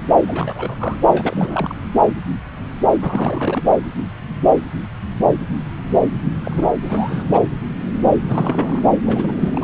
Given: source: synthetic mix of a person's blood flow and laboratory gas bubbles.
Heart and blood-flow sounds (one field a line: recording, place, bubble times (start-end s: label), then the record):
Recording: Doppler ultrasound of blood flow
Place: subclavian vein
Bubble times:
0.27-0.99 s: bubbles
1.08-1.74 s: bubbles
3.01-3.63 s: bubbles
6.44-6.67 s: bubbles
6.82-7.42 s: bubbles
8.28-8.79 s: bubbles
9.05-9.64 s: bubbles
From the record:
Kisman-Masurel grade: 332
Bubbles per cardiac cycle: rolling drumbeat, 9 or more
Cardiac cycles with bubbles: 50 to 99%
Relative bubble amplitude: moderate (0.250 to 0.450)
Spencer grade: 3 (all of the cardiac periods contain showers or single bubble signals, but not dominating or overriding the cardiac motion signals)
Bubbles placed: anywhere in the cardiac cycle